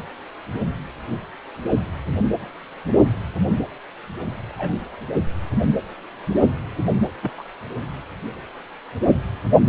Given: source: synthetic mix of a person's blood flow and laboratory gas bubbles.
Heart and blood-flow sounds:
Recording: Doppler ultrasound of blood flow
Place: precordium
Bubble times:
4.48-4.76 s: bubbles
7.23-7.30 s: bubbles
7.38-7.43 s: bubbles
From the record:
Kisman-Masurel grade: 111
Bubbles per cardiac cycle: 1 to 2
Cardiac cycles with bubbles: 1 to 10%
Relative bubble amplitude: barely perceptible (0.100 to 0.250)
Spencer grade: 1 (occasional bubble signal discernible with the cardiac motion signal, with majority of cardiac periods free of bubbles)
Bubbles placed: anywhere in the cardiac cycle

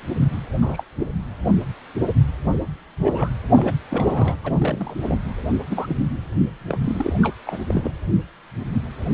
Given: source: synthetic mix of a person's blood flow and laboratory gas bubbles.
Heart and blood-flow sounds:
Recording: Doppler ultrasound of blood flow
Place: precordium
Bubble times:
0.61-0.83 s: bubbles
0.99-1.07 s: bubbles
2.52-2.58 s: bubbles
3.02-3.31 s: bubbles
3.55-3.79 s: bubbles
3.90-4.36 s: bubbles
4.44-4.52 s: bubbles
4.58-4.97 s: bubbles
5.01-5.18 s: bubbles
5.44-5.56 s: bubbles
5.70-5.96 s: bubbles
6.68-6.78 s: bubbles
6.84-7.13 s: bubbles
7.21-7.36 s: bubbles
7.45-7.59 s: bubbles
7.68-7.90 s: bubbles
From the record:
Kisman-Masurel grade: 232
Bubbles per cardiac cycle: several, 3 to 8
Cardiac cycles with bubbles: 50 to 99%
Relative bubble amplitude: moderate (0.250 to 0.450)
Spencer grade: 3 (all of the cardiac periods contain showers or single bubble signals, but not dominating or overriding the cardiac motion signals)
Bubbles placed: anywhere in the cardiac cycle

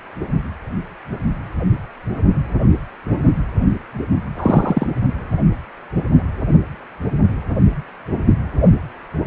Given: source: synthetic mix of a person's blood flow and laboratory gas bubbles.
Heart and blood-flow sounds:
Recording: Doppler ultrasound of blood flow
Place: precordium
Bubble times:
4.37-4.87 s: bubbles
From the record:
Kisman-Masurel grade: 113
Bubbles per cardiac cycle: 1 to 2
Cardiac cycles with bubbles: 1 to 10%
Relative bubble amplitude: loud (0.450 to 0.775)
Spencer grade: 1 (occasional bubble signal discernible with the cardiac motion signal, with majority of cardiac periods free of bubbles)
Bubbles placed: only in the low amplitude regions of the cardiac cycle

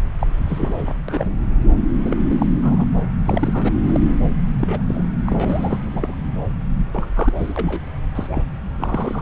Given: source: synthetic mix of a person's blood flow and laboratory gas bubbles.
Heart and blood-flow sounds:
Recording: Doppler ultrasound of blood flow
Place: subclavian vein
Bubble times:
0.19-0.27 s: bubbles
0.45-0.93 s: bubbles
1.08-1.32 s: bubbles
2.02-2.17 s: bubbles
2.30-2.34 s: bubbles
2.39-2.46 s: bubbles
2.53-2.85 s: bubbles
3.25-3.69 s: bubbles
3.83-4.17 s: bubbles
4.50-4.83 s: bubbles
4.87-5.13 s: bubbles
5.26-5.78 s: bubbles
5.93-6.16 s: bubbles
6.93-7.05 s: bubbles
7.16-7.33 s: bubbles
7.36-7.53 s: bubbles
7.56-7.82 s: bubbles
8.15-8.27 s: bubbles
8.31-8.43 s: bubbles
8.78-9.22 s: bubbles
From the record:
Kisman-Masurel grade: 242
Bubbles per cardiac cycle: several, 3 to 8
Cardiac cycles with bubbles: 100%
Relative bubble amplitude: moderate (0.250 to 0.450)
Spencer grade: 3 (all of the cardiac periods contain showers or single bubble signals, but not dominating or overriding the cardiac motion signals)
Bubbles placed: anywhere in the cardiac cycle

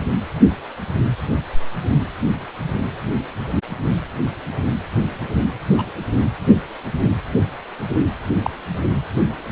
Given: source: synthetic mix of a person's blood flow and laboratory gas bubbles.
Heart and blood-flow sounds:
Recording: Doppler ultrasound of blood flow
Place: precordium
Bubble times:
5.78-5.83 s: bubbles
8.44-8.50 s: bubbles
From the record:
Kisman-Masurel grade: 122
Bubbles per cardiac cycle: 1 to 2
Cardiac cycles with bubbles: 10 to 50%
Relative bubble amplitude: moderate (0.250 to 0.450)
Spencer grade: 2 (many but less than half of the cardiac periods contain bubble signals, singularly or in groups)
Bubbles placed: anywhere in the cardiac cycle

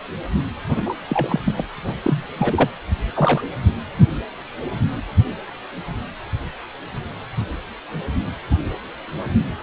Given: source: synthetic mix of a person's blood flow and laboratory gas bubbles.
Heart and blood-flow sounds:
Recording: Doppler ultrasound of blood flow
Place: precordium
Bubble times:
0.69-0.95 s: bubbles
1.08-1.40 s: bubbles
1.45-1.53 s: bubbles
1.57-1.65 s: bubbles
1.76-1.98 s: bubbles
2.01-2.26 s: bubbles
2.38-2.70 s: bubbles
3.16-3.43 s: bubbles
From the record:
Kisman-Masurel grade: 222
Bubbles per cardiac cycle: several, 3 to 8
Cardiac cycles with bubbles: 10 to 50%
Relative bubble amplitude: moderate (0.250 to 0.450)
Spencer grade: 2 (many but less than half of the cardiac periods contain bubble signals, singularly or in groups)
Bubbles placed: anywhere in the cardiac cycle

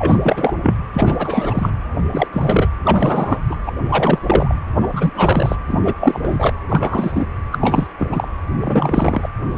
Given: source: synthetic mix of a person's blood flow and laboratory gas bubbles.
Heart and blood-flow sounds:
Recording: Doppler ultrasound of blood flow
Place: precordium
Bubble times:
0.00-0.18 s: bubbles
0.23-0.57 s: bubbles
0.62-0.75 s: bubbles
0.93-1.71 s: bubbles
2.12-2.27 s: bubbles
2.33-2.69 s: bubbles
2.84-3.38 s: bubbles
3.50-3.56 s: bubbles
3.65-3.73 s: bubbles
3.88-4.19 s: bubbles
4.25-4.54 s: bubbles
4.80-5.55 s: bubbles
5.67-5.79 s: bubbles
5.84-5.94 s: bubbles
6.00-6.53 s: bubbles
6.68-7.25 s: bubbles
7.51-7.58 s: bubbles
7.61-7.87 s: bubbles
7.99-8.28 s: bubbles
8.61-9.29 s: bubbles
9.54-9.58 s: bubbles
From the record:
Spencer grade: 3 (all of the cardiac periods contain showers or single bubble signals, but not dominating or overriding the cardiac motion signals)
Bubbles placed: anywhere in the cardiac cycle

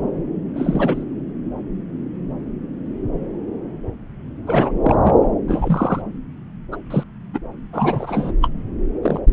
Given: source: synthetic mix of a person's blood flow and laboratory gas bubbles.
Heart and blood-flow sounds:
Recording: Doppler ultrasound of blood flow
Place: subclavian vein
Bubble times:
0.55-1.04 s: bubbles
4.46-4.72 s: bubbles
4.83-4.95 s: bubbles
5.03-5.15 s: bubbles
5.47-6.01 s: bubbles
6.71-6.76 s: bubbles
6.90-7.03 s: bubbles
7.33-7.38 s: bubbles
7.72-8.31 s: bubbles
8.41-8.48 s: bubbles
9.01-9.20 s: bubbles
9.30-9.33 s: bubbles
From the record:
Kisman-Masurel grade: 222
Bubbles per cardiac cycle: several, 3 to 8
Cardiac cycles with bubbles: 10 to 50%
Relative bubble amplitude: moderate (0.250 to 0.450)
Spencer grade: 2 (many but less than half of the cardiac periods contain bubble signals, singularly or in groups)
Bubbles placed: anywhere in the cardiac cycle

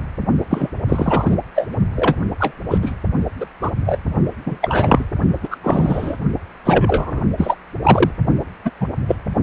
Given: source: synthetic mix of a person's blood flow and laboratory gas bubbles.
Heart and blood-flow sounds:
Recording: Doppler ultrasound of blood flow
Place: precordium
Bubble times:
0.00-0.02 s: bubbles
0.51-0.70 s: bubbles
0.89-1.36 s: bubbles
1.55-1.68 s: bubbles
1.95-2.16 s: bubbles
2.40-2.53 s: bubbles
2.70-2.78 s: bubbles
2.82-2.94 s: bubbles
3.40-3.45 s: bubbles
3.61-3.71 s: bubbles
3.86-3.98 s: bubbles
4.46-4.58 s: bubbles
4.62-5.05 s: bubbles
5.43-5.48 s: bubbles
5.50-5.57 s: bubbles
5.62-6.17 s: bubbles
6.65-7.21 s: bubbles
7.38-7.56 s: bubbles
7.83-8.11 s: bubbles
8.65-8.71 s: bubbles
8.80-8.89 s: bubbles
9.08-9.16 s: bubbles
From the record:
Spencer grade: 3 (all of the cardiac periods contain showers or single bubble signals, but not dominating or overriding the cardiac motion signals)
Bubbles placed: only in the low amplitude regions of the cardiac cycle

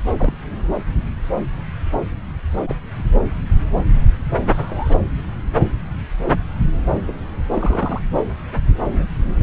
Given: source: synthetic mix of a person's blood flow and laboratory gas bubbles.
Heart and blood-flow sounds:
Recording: Doppler ultrasound of blood flow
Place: subclavian vein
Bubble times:
0.17-0.37 s: bubbles
2.67-2.75 s: bubbles
4.47-4.96 s: bubbles
7.05-7.13 s: bubbles
7.54-8.02 s: bubbles
8.89-9.05 s: bubbles
From the record:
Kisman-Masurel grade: 121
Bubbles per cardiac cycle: 1 to 2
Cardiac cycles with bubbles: 10 to 50%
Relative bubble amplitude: barely perceptible (0.100 to 0.250)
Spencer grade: 2 (many but less than half of the cardiac periods contain bubble signals, singularly or in groups)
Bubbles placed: anywhere in the cardiac cycle

